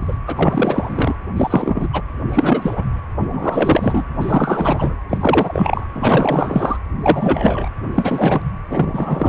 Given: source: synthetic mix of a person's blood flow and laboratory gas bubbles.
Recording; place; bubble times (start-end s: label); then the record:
Doppler ultrasound of blood flow; precordium
0.00-0.17 s: bubbles
0.26-1.15 s: bubbles
1.36-1.88 s: bubbles
1.92-2.02 s: bubbles
2.29-2.84 s: bubbles
3.19-4.04 s: bubbles
4.20-4.95 s: bubbles
5.10-5.87 s: bubbles
5.95-6.78 s: bubbles
7.00-7.69 s: bubbles
7.95-8.42 s: bubbles
8.70-9.29 s: bubbles
From the record:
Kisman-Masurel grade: 343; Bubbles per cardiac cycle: rolling drumbeat, 9 or more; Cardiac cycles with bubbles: 100%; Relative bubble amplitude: loud (0.450 to 0.775); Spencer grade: 3 (all of the cardiac periods contain showers or single bubble signals, but not dominating or overriding the cardiac motion signals); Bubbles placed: anywhere in the cardiac cycle